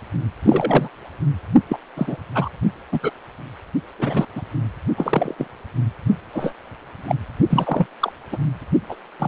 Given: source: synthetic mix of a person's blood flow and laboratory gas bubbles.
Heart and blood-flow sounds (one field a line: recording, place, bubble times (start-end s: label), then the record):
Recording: Doppler ultrasound of blood flow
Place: precordium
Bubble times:
0.43-0.89 s: bubbles
1.69-1.77 s: bubbles
1.96-2.17 s: bubbles
2.35-2.49 s: bubbles
2.92-3.00 s: bubbles
3.02-3.12 s: bubbles
3.99-4.25 s: bubbles
4.36-4.42 s: bubbles
4.96-5.34 s: bubbles
5.37-5.47 s: bubbles
6.33-6.54 s: bubbles
7.07-7.16 s: bubbles
7.50-7.86 s: bubbles
8.00-8.12 s: bubbles
8.31-8.38 s: bubbles
8.88-8.96 s: bubbles
9.18-9.27 s: bubbles
From the record:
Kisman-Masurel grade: 243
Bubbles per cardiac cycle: several, 3 to 8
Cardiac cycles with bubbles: 100%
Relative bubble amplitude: loud (0.450 to 0.775)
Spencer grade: 3 (all of the cardiac periods contain showers or single bubble signals, but not dominating or overriding the cardiac motion signals)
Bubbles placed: only in the low amplitude regions of the cardiac cycle